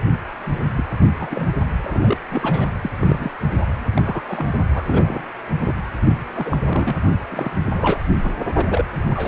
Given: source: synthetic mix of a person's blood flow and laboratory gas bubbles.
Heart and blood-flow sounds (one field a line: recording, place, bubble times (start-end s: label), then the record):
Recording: Doppler ultrasound of blood flow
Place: precordium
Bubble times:
0.76-0.84 s: bubbles
1.19-1.46 s: bubbles
1.83-2.17 s: bubbles
2.29-2.70 s: bubbles
2.81-2.92 s: bubbles
3.00-3.31 s: bubbles
3.60-3.66 s: bubbles
3.94-4.02 s: bubbles
4.04-4.21 s: bubbles
4.28-4.52 s: bubbles
4.65-4.84 s: bubbles
4.88-5.25 s: bubbles
5.60-5.75 s: bubbles
6.03-6.14 s: bubbles
6.35-6.57 s: bubbles
6.63-6.96 s: bubbles
7.29-7.54 s: bubbles
7.73-7.99 s: bubbles
8.23-8.31 s: bubbles
8.54-8.66 s: bubbles
8.70-8.84 s: bubbles
9.10-9.28 s: bubbles
From the record:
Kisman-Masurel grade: 242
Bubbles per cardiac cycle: several, 3 to 8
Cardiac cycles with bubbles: 100%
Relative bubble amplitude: moderate (0.250 to 0.450)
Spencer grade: 3 (all of the cardiac periods contain showers or single bubble signals, but not dominating or overriding the cardiac motion signals)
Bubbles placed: anywhere in the cardiac cycle